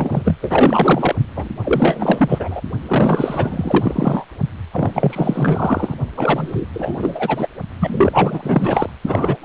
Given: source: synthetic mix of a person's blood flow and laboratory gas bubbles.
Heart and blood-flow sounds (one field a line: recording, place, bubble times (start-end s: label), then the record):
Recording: Doppler ultrasound of blood flow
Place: precordium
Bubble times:
0.00-0.36 s: bubbles
0.41-1.15 s: bubbles
1.36-1.48 s: bubbles
1.64-2.61 s: bubbles
2.87-4.27 s: bubbles
4.71-5.94 s: bubbles
6.17-6.65 s: bubbles
6.73-7.48 s: bubbles
7.79-8.90 s: bubbles
9.05-9.38 s: bubbles
9.42-9.45 s: bubbles
From the record:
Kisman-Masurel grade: 444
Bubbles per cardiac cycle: continuous sound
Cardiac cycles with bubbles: 100%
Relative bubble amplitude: maximal (0.775 to 0.999)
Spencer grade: 4 (maximum detectable bubble signal sounding continuously throughout systole and diastole of every cardiac period, and overriding the amplitude of the normal cardiac signals)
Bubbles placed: only in the low amplitude regions of the cardiac cycle